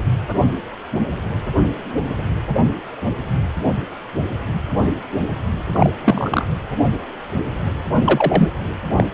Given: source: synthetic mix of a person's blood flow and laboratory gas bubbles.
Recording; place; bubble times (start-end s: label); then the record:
Doppler ultrasound of blood flow; precordium
5.73-5.90 s: bubbles
6.02-6.45 s: bubbles
8.04-8.50 s: bubbles
8.96-9.06 s: bubbles
From the record:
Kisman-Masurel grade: 123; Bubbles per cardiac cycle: 1 to 2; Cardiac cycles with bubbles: 10 to 50%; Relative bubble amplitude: loud (0.450 to 0.775); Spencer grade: 2 (many but less than half of the cardiac periods contain bubble signals, singularly or in groups); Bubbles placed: anywhere in the cardiac cycle